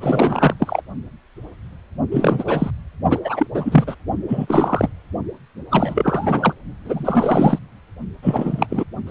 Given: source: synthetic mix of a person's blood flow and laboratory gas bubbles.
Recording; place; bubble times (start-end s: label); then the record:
Doppler ultrasound of blood flow; precordium
0.00-0.54 s: bubbles
0.59-0.81 s: bubbles
2.11-2.71 s: bubbles
3.09-3.20 s: bubbles
3.25-3.47 s: bubbles
3.54-3.95 s: bubbles
4.28-4.90 s: bubbles
5.71-6.54 s: bubbles
6.84-7.58 s: bubbles
8.22-8.66 s: bubbles
8.70-8.84 s: bubbles
9.07-9.11 s: bubbles
From the record:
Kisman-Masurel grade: 333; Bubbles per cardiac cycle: rolling drumbeat, 9 or more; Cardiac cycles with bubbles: 50 to 99%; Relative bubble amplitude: loud (0.450 to 0.775); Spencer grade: 3 (all of the cardiac periods contain showers or single bubble signals, but not dominating or overriding the cardiac motion signals); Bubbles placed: only in the low amplitude regions of the cardiac cycle